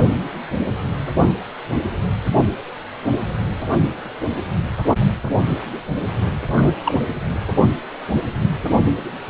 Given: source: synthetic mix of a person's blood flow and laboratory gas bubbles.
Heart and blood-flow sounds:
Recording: Doppler ultrasound of blood flow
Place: precordium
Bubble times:
6.54-6.75 s: bubbles
6.83-6.95 s: bubbles
From the record:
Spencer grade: 1 (occasional bubble signal discernible with the cardiac motion signal, with majority of cardiac periods free of bubbles)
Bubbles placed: only in the low amplitude regions of the cardiac cycle

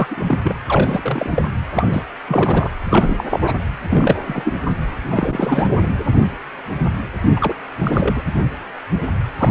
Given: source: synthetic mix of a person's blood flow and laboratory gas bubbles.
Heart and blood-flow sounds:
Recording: Doppler ultrasound of blood flow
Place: precordium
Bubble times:
0.00-0.55 s: bubbles
0.68-1.50 s: bubbles
1.74-2.03 s: bubbles
2.27-2.71 s: bubbles
2.83-3.24 s: bubbles
3.31-3.40 s: bubbles
3.44-3.60 s: bubbles
3.90-4.17 s: bubbles
4.26-4.42 s: bubbles
4.44-4.54 s: bubbles
5.09-5.88 s: bubbles
7.36-7.54 s: bubbles
7.83-8.23 s: bubbles
9.38-9.51 s: bubbles
From the record:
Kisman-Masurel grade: 333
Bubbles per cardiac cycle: rolling drumbeat, 9 or more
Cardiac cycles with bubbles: 50 to 99%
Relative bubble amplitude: loud (0.450 to 0.775)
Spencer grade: 3 (all of the cardiac periods contain showers or single bubble signals, but not dominating or overriding the cardiac motion signals)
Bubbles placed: anywhere in the cardiac cycle

